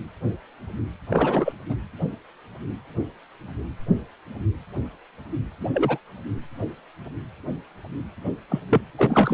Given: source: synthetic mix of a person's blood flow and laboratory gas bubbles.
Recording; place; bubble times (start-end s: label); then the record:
Doppler ultrasound of blood flow; precordium
1.09-1.52 s: bubbles
1.69-1.76 s: bubbles
5.60-5.68 s: bubbles
5.73-5.98 s: bubbles
8.49-8.60 s: bubbles
8.71-8.80 s: bubbles
8.98-9.33 s: bubbles
From the record:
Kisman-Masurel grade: 222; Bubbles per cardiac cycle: several, 3 to 8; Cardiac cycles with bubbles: 10 to 50%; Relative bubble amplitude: moderate (0.250 to 0.450); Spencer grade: 2 (many but less than half of the cardiac periods contain bubble signals, singularly or in groups); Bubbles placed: anywhere in the cardiac cycle